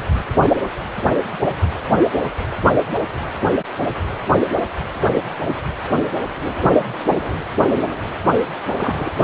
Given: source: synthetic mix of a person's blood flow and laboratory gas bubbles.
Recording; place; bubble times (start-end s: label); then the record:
Doppler ultrasound of blood flow; precordium
8.77-9.11 s: bubbles
From the record:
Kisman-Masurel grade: 112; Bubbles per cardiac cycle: 1 to 2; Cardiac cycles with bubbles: 1 to 10%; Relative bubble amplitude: moderate (0.250 to 0.450); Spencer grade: 1 (occasional bubble signal discernible with the cardiac motion signal, with majority of cardiac periods free of bubbles); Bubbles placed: anywhere in the cardiac cycle